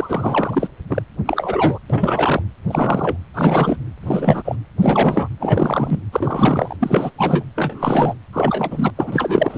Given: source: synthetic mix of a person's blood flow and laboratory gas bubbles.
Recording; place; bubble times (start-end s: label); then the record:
Doppler ultrasound of blood flow; precordium
0.00-0.68 s: bubbles
0.89-1.02 s: bubbles
1.25-1.79 s: bubbles
1.90-2.42 s: bubbles
2.68-3.17 s: bubbles
3.34-3.77 s: bubbles
4.03-4.55 s: bubbles
4.80-5.29 s: bubbles
5.39-6.01 s: bubbles
6.12-6.77 s: bubbles
6.79-7.11 s: bubbles
7.18-7.44 s: bubbles
7.55-8.14 s: bubbles
8.33-8.92 s: bubbles
8.96-9.58 s: bubbles
From the record:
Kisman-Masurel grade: 343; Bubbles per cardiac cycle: rolling drumbeat, 9 or more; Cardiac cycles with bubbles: 100%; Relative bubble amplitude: loud (0.450 to 0.775); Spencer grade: 3 (all of the cardiac periods contain showers or single bubble signals, but not dominating or overriding the cardiac motion signals); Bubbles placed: anywhere in the cardiac cycle